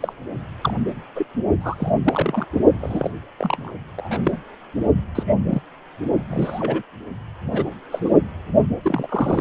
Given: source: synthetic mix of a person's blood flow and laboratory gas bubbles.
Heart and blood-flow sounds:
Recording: Doppler ultrasound of blood flow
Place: precordium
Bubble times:
0.00-0.12 s: bubbles
0.61-0.73 s: bubbles
1.15-1.26 s: bubbles
1.60-1.92 s: bubbles
2.04-2.46 s: bubbles
2.80-3.10 s: bubbles
3.38-3.73 s: bubbles
3.97-4.37 s: bubbles
5.15-5.61 s: bubbles
6.30-6.83 s: bubbles
7.50-7.64 s: bubbles
7.92-8.12 s: bubbles
8.83-9.41 s: bubbles
From the record:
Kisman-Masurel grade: 242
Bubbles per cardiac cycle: several, 3 to 8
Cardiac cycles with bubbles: 100%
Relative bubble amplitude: moderate (0.250 to 0.450)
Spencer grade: 3 (all of the cardiac periods contain showers or single bubble signals, but not dominating or overriding the cardiac motion signals)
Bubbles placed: only in the low amplitude regions of the cardiac cycle

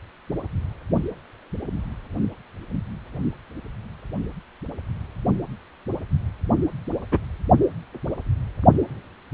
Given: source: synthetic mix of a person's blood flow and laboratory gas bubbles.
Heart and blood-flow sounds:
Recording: Doppler ultrasound of blood flow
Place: precordium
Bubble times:
7.12-7.19 s: bubbles
From the record:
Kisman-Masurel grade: 112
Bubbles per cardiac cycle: 1 to 2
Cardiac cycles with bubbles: 1 to 10%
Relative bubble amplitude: moderate (0.250 to 0.450)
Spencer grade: 1 (occasional bubble signal discernible with the cardiac motion signal, with majority of cardiac periods free of bubbles)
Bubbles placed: only in the low amplitude regions of the cardiac cycle

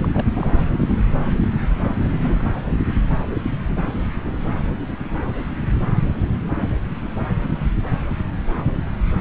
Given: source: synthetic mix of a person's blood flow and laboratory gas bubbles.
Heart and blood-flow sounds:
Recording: Doppler ultrasound of blood flow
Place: subclavian vein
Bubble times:
0.02-0.08 s: bubbles
0.12-0.27 s: bubbles
0.35-0.52 s: bubbles
0.54-1.00 s: bubbles
1.41-1.48 s: bubbles
1.80-1.99 s: bubbles
2.06-2.50 s: bubbles
From the record:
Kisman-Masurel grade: 221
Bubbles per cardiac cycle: several, 3 to 8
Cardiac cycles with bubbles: 10 to 50%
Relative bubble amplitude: barely perceptible (0.100 to 0.250)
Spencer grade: 2 (many but less than half of the cardiac periods contain bubble signals, singularly or in groups)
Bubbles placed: anywhere in the cardiac cycle

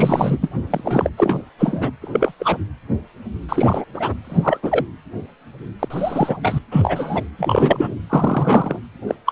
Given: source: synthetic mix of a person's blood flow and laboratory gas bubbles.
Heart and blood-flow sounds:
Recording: Doppler ultrasound of blood flow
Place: precordium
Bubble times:
0.00-0.38 s: bubbles
0.41-0.50 s: bubbles
0.70-0.81 s: bubbles
0.84-1.10 s: bubbles
1.17-1.42 s: bubbles
1.58-1.91 s: bubbles
2.01-2.33 s: bubbles
2.39-2.58 s: bubbles
3.48-3.84 s: bubbles
3.94-4.14 s: bubbles
4.24-4.60 s: bubbles
4.62-4.84 s: bubbles
5.79-6.37 s: bubbles
6.42-6.59 s: bubbles
6.71-7.23 s: bubbles
7.38-7.96 s: bubbles
8.09-8.79 s: bubbles
9.07-9.15 s: bubbles
9.26-9.32 s: bubbles
From the record:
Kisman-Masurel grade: 233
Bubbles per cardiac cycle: several, 3 to 8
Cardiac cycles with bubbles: 50 to 99%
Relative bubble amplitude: loud (0.450 to 0.775)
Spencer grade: 3 (all of the cardiac periods contain showers or single bubble signals, but not dominating or overriding the cardiac motion signals)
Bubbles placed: anywhere in the cardiac cycle

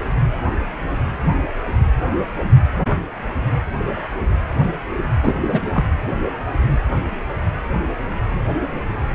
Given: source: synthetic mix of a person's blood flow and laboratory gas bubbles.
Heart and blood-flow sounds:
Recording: Doppler ultrasound of blood flow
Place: precordium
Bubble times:
5.21-5.33 s: bubbles
5.48-5.61 s: bubbles
5.73-5.84 s: bubbles
From the record:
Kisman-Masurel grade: 212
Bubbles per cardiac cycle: several, 3 to 8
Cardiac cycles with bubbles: 1 to 10%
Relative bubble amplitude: moderate (0.250 to 0.450)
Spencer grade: 1 (occasional bubble signal discernible with the cardiac motion signal, with majority of cardiac periods free of bubbles)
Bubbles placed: anywhere in the cardiac cycle

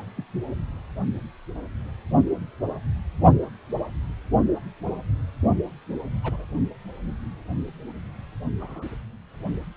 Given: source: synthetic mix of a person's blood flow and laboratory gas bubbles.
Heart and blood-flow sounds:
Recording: Doppler ultrasound of blood flow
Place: precordium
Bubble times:
0.17-0.24 s: bubbles
6.23-6.45 s: bubbles
8.60-8.91 s: bubbles
From the record:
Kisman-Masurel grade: 121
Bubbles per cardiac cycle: 1 to 2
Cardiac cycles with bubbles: 10 to 50%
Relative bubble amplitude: barely perceptible (0.100 to 0.250)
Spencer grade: 2 (many but less than half of the cardiac periods contain bubble signals, singularly or in groups)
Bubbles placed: only in the low amplitude regions of the cardiac cycle

